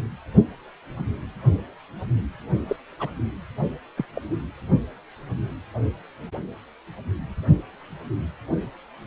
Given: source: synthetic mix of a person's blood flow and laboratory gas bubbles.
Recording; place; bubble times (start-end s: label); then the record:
Doppler ultrasound of blood flow; precordium
2.68-2.76 s: bubbles
3.00-3.10 s: bubbles
3.97-4.06 s: bubbles
4.14-4.21 s: bubbles
From the record:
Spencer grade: 2 (many but less than half of the cardiac periods contain bubble signals, singularly or in groups); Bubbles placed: anywhere in the cardiac cycle